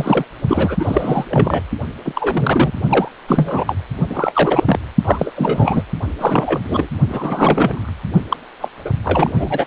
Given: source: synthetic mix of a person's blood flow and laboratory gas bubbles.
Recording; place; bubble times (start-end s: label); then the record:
Doppler ultrasound of blood flow; precordium
0.00-0.25 s: bubbles
0.48-0.76 s: bubbles
0.79-1.25 s: bubbles
1.29-1.62 s: bubbles
2.05-2.72 s: bubbles
2.89-3.08 s: bubbles
3.28-3.76 s: bubbles
4.09-4.63 s: bubbles
4.66-4.79 s: bubbles
5.04-5.31 s: bubbles
5.36-5.84 s: bubbles
6.19-6.61 s: bubbles
6.65-6.88 s: bubbles
7.08-7.91 s: bubbles
8.29-8.37 s: bubbles
8.60-8.68 s: bubbles
8.85-8.90 s: bubbles
9.04-9.65 s: bubbles
From the record:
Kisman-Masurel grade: 343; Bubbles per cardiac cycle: rolling drumbeat, 9 or more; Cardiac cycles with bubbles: 100%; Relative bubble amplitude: loud (0.450 to 0.775); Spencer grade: 3 (all of the cardiac periods contain showers or single bubble signals, but not dominating or overriding the cardiac motion signals); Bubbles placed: only in the low amplitude regions of the cardiac cycle